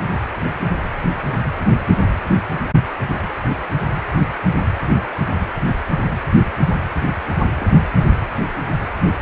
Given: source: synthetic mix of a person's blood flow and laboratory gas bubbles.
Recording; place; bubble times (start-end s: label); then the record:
Doppler ultrasound of blood flow; precordium
7.57-7.67 s: bubbles
From the record:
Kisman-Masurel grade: 111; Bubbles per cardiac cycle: 1 to 2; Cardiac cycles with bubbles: 1 to 10%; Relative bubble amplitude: barely perceptible (0.100 to 0.250); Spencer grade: 1 (occasional bubble signal discernible with the cardiac motion signal, with majority of cardiac periods free of bubbles); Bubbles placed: anywhere in the cardiac cycle